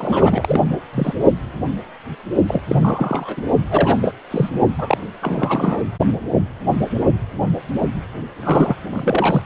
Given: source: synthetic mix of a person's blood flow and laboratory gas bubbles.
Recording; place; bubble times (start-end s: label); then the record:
Doppler ultrasound of blood flow; precordium
0.00-0.61 s: bubbles
0.93-1.15 s: bubbles
2.48-2.61 s: bubbles
2.69-3.42 s: bubbles
3.70-4.14 s: bubbles
4.30-4.50 s: bubbles
4.78-4.97 s: bubbles
5.21-5.83 s: bubbles
8.39-8.76 s: bubbles
8.92-9.42 s: bubbles
From the record:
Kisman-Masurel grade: 332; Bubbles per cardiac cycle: rolling drumbeat, 9 or more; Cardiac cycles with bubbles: 50 to 99%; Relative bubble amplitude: moderate (0.250 to 0.450); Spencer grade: 3 (all of the cardiac periods contain showers or single bubble signals, but not dominating or overriding the cardiac motion signals); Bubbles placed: only in the low amplitude regions of the cardiac cycle